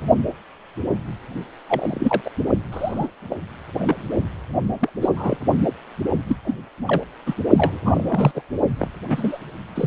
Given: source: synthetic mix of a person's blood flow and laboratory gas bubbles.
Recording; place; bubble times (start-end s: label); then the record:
Doppler ultrasound of blood flow; precordium
1.69-2.21 s: bubbles
2.25-2.31 s: bubbles
2.72-3.08 s: bubbles
3.30-3.37 s: bubbles
3.79-3.95 s: bubbles
4.79-4.90 s: bubbles
5.01-5.09 s: bubbles
5.17-5.37 s: bubbles
6.28-6.36 s: bubbles
6.45-6.55 s: bubbles
6.86-7.04 s: bubbles
7.26-7.34 s: bubbles
7.58-7.81 s: bubbles
7.85-8.42 s: bubbles
8.79-8.88 s: bubbles
9.09-9.38 s: bubbles
9.75-9.87 s: bubbles
From the record:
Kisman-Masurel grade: 232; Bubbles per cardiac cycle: several, 3 to 8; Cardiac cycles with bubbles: 50 to 99%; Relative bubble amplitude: moderate (0.250 to 0.450); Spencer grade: 3 (all of the cardiac periods contain showers or single bubble signals, but not dominating or overriding the cardiac motion signals); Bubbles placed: only in the low amplitude regions of the cardiac cycle